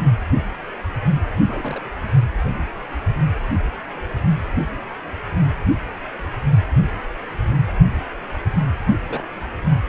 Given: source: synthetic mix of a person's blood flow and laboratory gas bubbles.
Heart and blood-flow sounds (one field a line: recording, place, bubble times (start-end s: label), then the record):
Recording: Doppler ultrasound of blood flow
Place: precordium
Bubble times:
1.46-1.81 s: bubbles
9.07-9.27 s: bubbles
From the record:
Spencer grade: 2 (many but less than half of the cardiac periods contain bubble signals, singularly or in groups)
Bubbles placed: anywhere in the cardiac cycle